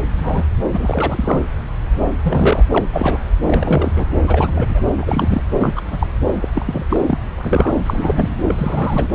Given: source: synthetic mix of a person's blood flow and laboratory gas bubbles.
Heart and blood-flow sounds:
Doppler ultrasound of blood flow; subclavian vein
0.18-0.45 s: bubbles
0.71-1.40 s: bubbles
2.23-2.63 s: bubbles
2.71-2.85 s: bubbles
2.93-3.18 s: bubbles
3.44-3.90 s: bubbles
3.96-4.07 s: bubbles
4.28-4.83 s: bubbles
4.96-5.44 s: bubbles
5.59-5.82 s: bubbles
5.92-6.07 s: bubbles
6.42-6.49 s: bubbles
6.55-6.86 s: bubbles
6.89-7.00 s: bubbles
7.06-7.18 s: bubbles
7.38-7.72 s: bubbles
7.86-8.29 s: bubbles
8.49-9.08 s: bubbles
From the record:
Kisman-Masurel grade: 242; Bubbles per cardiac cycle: several, 3 to 8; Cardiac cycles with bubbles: 100%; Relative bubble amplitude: moderate (0.250 to 0.450); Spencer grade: 3 (all of the cardiac periods contain showers or single bubble signals, but not dominating or overriding the cardiac motion signals); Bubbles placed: anywhere in the cardiac cycle

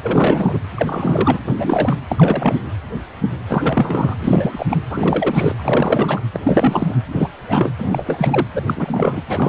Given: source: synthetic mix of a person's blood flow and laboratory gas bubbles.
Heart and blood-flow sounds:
Doppler ultrasound of blood flow; precordium
0.03-0.59 s: bubbles
0.74-1.39 s: bubbles
1.46-1.54 s: bubbles
1.57-1.98 s: bubbles
2.08-2.56 s: bubbles
3.48-4.15 s: bubbles
4.20-4.66 s: bubbles
4.70-4.78 s: bubbles
4.90-6.22 s: bubbles
6.32-6.40 s: bubbles
6.45-6.96 s: bubbles
7.12-7.28 s: bubbles
7.48-7.71 s: bubbles
7.79-8.47 s: bubbles
8.54-8.62 s: bubbles
8.67-9.22 s: bubbles
9.29-9.49 s: bubbles
From the record:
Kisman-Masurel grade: 332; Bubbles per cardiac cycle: rolling drumbeat, 9 or more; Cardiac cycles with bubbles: 50 to 99%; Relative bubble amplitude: moderate (0.250 to 0.450); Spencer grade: 3 (all of the cardiac periods contain showers or single bubble signals, but not dominating or overriding the cardiac motion signals); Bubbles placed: anywhere in the cardiac cycle

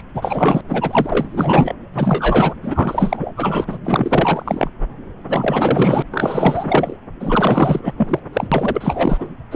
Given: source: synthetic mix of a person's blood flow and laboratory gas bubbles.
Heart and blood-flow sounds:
Doppler ultrasound of blood flow; subclavian vein
0.00-0.02 s: bubbles
0.14-0.62 s: bubbles
0.68-1.74 s: bubbles
1.94-2.54 s: bubbles
2.62-3.31 s: bubbles
3.37-3.65 s: bubbles
3.67-3.78 s: bubbles
3.84-4.69 s: bubbles
5.28-6.02 s: bubbles
6.11-6.96 s: bubbles
7.20-7.94 s: bubbles
7.97-8.20 s: bubbles
8.33-8.47 s: bubbles
8.52-9.29 s: bubbles
9.51-9.56 s: bubbles
From the record:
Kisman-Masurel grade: 444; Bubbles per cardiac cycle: continuous sound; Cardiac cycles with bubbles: 100%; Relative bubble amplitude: maximal (0.775 to 0.999); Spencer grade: 4 (maximum detectable bubble signal sounding continuously throughout systole and diastole of every cardiac period, and overriding the amplitude of the normal cardiac signals); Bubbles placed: anywhere in the cardiac cycle

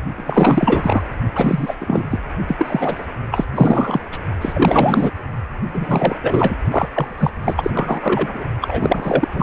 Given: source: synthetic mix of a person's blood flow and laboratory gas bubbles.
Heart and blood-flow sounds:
Doppler ultrasound of blood flow; precordium
0.14-1.03 s: bubbles
1.35-1.75 s: bubbles
1.80-2.07 s: bubbles
2.10-2.20 s: bubbles
2.47-3.05 s: bubbles
3.31-3.44 s: bubbles
3.54-4.00 s: bubbles
4.12-4.18 s: bubbles
4.41-5.12 s: bubbles
5.73-6.18 s: bubbles
6.22-6.56 s: bubbles
6.71-6.88 s: bubbles
6.92-7.30 s: bubbles
7.44-8.44 s: bubbles
8.61-9.28 s: bubbles
9.31-9.42 s: bubbles
From the record:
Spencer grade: 4 (maximum detectable bubble signal sounding continuously throughout systole and diastole of every cardiac period, and overriding the amplitude of the normal cardiac signals); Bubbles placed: only in the low amplitude regions of the cardiac cycle

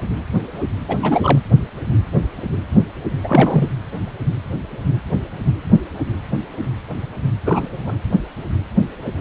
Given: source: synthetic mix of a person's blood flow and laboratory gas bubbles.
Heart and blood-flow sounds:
Doppler ultrasound of blood flow; precordium
0.88-1.40 s: bubbles
3.24-3.69 s: bubbles
7.45-7.95 s: bubbles
From the record:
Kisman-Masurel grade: 222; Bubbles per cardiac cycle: several, 3 to 8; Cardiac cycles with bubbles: 10 to 50%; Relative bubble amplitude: moderate (0.250 to 0.450); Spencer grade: 2 (many but less than half of the cardiac periods contain bubble signals, singularly or in groups); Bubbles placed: anywhere in the cardiac cycle

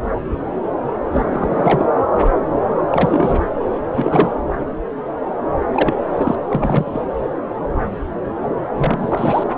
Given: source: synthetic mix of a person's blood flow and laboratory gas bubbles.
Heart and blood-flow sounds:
Doppler ultrasound of blood flow; subclavian vein
1.11-1.86 s: bubbles
2.92-3.43 s: bubbles
3.96-4.35 s: bubbles
5.74-5.93 s: bubbles
6.17-6.35 s: bubbles
6.48-7.00 s: bubbles
8.77-9.44 s: bubbles
From the record:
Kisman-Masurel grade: 232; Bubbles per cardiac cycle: several, 3 to 8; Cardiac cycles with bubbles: 50 to 99%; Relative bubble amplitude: moderate (0.250 to 0.450); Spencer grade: 3 (all of the cardiac periods contain showers or single bubble signals, but not dominating or overriding the cardiac motion signals); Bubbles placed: anywhere in the cardiac cycle

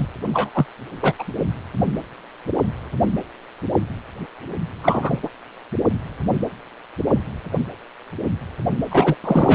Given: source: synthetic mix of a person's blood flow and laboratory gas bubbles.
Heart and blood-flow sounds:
Doppler ultrasound of blood flow; precordium
0.00-0.07 s: bubbles
0.33-0.50 s: bubbles
0.53-0.66 s: bubbles
1.01-1.14 s: bubbles
1.19-1.24 s: bubbles
4.83-5.20 s: bubbles
5.23-5.29 s: bubbles
8.91-9.16 s: bubbles
9.23-9.55 s: bubbles
From the record:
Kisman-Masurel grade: 223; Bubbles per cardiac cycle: several, 3 to 8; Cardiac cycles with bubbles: 10 to 50%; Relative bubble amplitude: loud (0.450 to 0.775); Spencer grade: 2 (many but less than half of the cardiac periods contain bubble signals, singularly or in groups); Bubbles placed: only in the low amplitude regions of the cardiac cycle

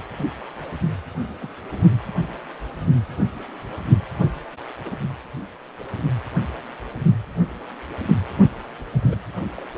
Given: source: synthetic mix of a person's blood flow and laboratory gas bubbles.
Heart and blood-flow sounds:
Doppler ultrasound of blood flow; precordium
1.39-1.50 s: bubbles
1.71-1.86 s: bubbles
2.07-2.12 s: bubbles
4.85-4.98 s: bubbles
8.92-9.17 s: bubbles
9.57-9.62 s: bubbles
From the record:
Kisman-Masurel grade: 121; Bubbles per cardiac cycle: 1 to 2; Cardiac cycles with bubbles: 10 to 50%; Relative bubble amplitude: barely perceptible (0.100 to 0.250); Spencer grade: 2 (many but less than half of the cardiac periods contain bubble signals, singularly or in groups); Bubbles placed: anywhere in the cardiac cycle

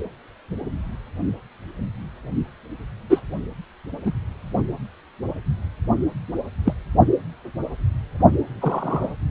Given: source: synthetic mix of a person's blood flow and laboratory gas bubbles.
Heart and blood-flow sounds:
Doppler ultrasound of blood flow; precordium
3.09-3.20 s: bubbles
4.05-4.12 s: bubbles
6.65-6.73 s: bubbles
8.61-9.10 s: bubbles
From the record:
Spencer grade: 2 (many but less than half of the cardiac periods contain bubble signals, singularly or in groups); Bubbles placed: only in the low amplitude regions of the cardiac cycle

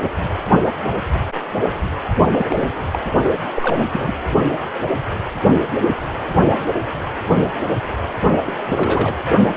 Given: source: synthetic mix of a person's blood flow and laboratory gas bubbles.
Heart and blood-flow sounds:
Doppler ultrasound of blood flow; precordium
2.30-2.74 s: bubbles
2.92-2.98 s: bubbles
3.55-3.87 s: bubbles
3.91-4.14 s: bubbles
8.46-8.54 s: bubbles
8.65-9.13 s: bubbles
From the record:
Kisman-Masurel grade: 222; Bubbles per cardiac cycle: several, 3 to 8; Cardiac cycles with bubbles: 10 to 50%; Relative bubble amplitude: moderate (0.250 to 0.450); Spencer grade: 2 (many but less than half of the cardiac periods contain bubble signals, singularly or in groups); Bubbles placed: only in the low amplitude regions of the cardiac cycle

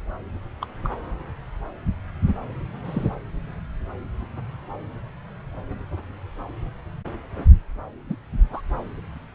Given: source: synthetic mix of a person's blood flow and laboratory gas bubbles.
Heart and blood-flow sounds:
Doppler ultrasound of blood flow; subclavian vein
0.60-0.66 s: bubbles
0.83-0.90 s: bubbles
2.85-3.08 s: bubbles
8.09-8.16 s: bubbles
8.52-8.61 s: bubbles
From the record:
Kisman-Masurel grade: 121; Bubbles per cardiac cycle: 1 to 2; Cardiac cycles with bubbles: 10 to 50%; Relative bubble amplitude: barely perceptible (0.100 to 0.250); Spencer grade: 2 (many but less than half of the cardiac periods contain bubble signals, singularly or in groups); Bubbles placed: anywhere in the cardiac cycle

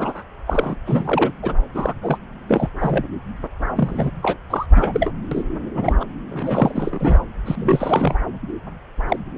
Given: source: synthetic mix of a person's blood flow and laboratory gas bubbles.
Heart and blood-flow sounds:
Doppler ultrasound of blood flow; subclavian vein
0.00-0.23 s: bubbles
0.47-0.75 s: bubbles
0.86-1.31 s: bubbles
1.42-1.56 s: bubbles
1.74-1.93 s: bubbles
2.02-2.18 s: bubbles
2.48-2.69 s: bubbles
2.79-3.06 s: bubbles
3.76-4.11 s: bubbles
4.22-4.38 s: bubbles
4.50-4.66 s: bubbles
4.76-5.12 s: bubbles
5.31-5.43 s: bubbles
5.75-5.97 s: bubbles
6.00-6.05 s: bubbles
6.30-7.18 s: bubbles
7.46-8.15 s: bubbles
9.09-9.17 s: bubbles
From the record:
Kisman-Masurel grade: 342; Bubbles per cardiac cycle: rolling drumbeat, 9 or more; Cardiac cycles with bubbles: 100%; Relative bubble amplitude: moderate (0.250 to 0.450); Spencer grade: 3 (all of the cardiac periods contain showers or single bubble signals, but not dominating or overriding the cardiac motion signals); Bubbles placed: anywhere in the cardiac cycle

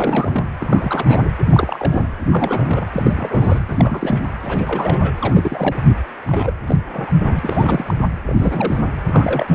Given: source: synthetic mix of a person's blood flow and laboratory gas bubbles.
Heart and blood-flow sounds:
Doppler ultrasound of blood flow; precordium
0.00-0.48 s: bubbles
0.58-1.28 s: bubbles
1.39-2.07 s: bubbles
2.31-2.86 s: bubbles
2.92-3.59 s: bubbles
3.68-4.22 s: bubbles
4.42-5.12 s: bubbles
5.21-5.83 s: bubbles
6.27-6.53 s: bubbles
6.67-6.76 s: bubbles
6.93-7.12 s: bubbles
7.25-7.39 s: bubbles
7.42-7.97 s: bubbles
8.27-8.82 s: bubbles
9.07-9.55 s: bubbles
From the record:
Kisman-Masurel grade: 342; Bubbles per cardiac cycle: rolling drumbeat, 9 or more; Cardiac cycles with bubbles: 100%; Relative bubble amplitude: moderate (0.250 to 0.450); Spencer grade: 3 (all of the cardiac periods contain showers or single bubble signals, but not dominating or overriding the cardiac motion signals); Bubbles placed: anywhere in the cardiac cycle

